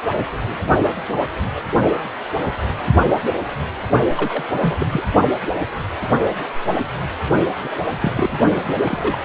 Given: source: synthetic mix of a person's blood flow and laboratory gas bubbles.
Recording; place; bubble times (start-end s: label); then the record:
Doppler ultrasound of blood flow; precordium
4.15-4.43 s: bubbles
4.61-4.86 s: bubbles
4.90-5.02 s: bubbles
7.59-7.69 s: bubbles
7.96-8.12 s: bubbles
8.17-8.41 s: bubbles
8.52-9.17 s: bubbles
From the record:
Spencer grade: 2 (many but less than half of the cardiac periods contain bubble signals, singularly or in groups); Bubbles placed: only in the low amplitude regions of the cardiac cycle